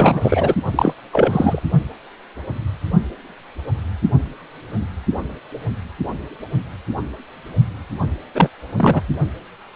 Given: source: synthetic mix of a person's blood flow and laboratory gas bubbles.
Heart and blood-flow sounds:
Doppler ultrasound of blood flow; precordium
0.00-0.55 s: bubbles
0.72-0.94 s: bubbles
1.12-1.61 s: bubbles
8.35-8.49 s: bubbles
8.77-9.02 s: bubbles
From the record:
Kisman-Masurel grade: 223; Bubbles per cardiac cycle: several, 3 to 8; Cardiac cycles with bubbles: 10 to 50%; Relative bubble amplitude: loud (0.450 to 0.775); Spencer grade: 2 (many but less than half of the cardiac periods contain bubble signals, singularly or in groups); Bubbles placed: anywhere in the cardiac cycle

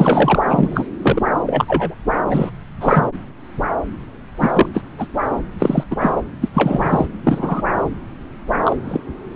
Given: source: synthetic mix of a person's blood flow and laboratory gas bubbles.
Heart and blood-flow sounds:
Doppler ultrasound of blood flow; subclavian vein
0.00-0.40 s: bubbles
0.48-0.87 s: bubbles
1.02-1.23 s: bubbles
1.47-1.65 s: bubbles
1.68-1.95 s: bubbles
2.28-2.50 s: bubbles
2.81-3.06 s: bubbles
4.37-4.69 s: bubbles
4.73-4.83 s: bubbles
4.98-5.07 s: bubbles
5.58-5.83 s: bubbles
5.90-5.96 s: bubbles
6.00-6.14 s: bubbles
6.40-6.50 s: bubbles
6.54-7.07 s: bubbles
7.23-7.62 s: bubbles
8.62-8.76 s: bubbles
8.84-9.00 s: bubbles
From the record:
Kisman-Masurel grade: 233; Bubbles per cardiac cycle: several, 3 to 8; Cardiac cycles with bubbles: 50 to 99%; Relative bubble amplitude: loud (0.450 to 0.775); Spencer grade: 3 (all of the cardiac periods contain showers or single bubble signals, but not dominating or overriding the cardiac motion signals); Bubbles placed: anywhere in the cardiac cycle

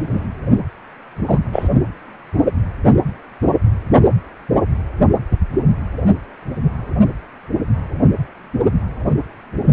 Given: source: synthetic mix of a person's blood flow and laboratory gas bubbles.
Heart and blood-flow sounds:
Doppler ultrasound of blood flow; precordium
0.00-0.26 s: bubbles
1.26-1.39 s: bubbles
1.52-1.68 s: bubbles
From the record:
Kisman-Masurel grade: 123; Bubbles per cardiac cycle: 1 to 2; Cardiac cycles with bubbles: 10 to 50%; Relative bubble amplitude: loud (0.450 to 0.775); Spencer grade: 2 (many but less than half of the cardiac periods contain bubble signals, singularly or in groups); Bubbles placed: anywhere in the cardiac cycle

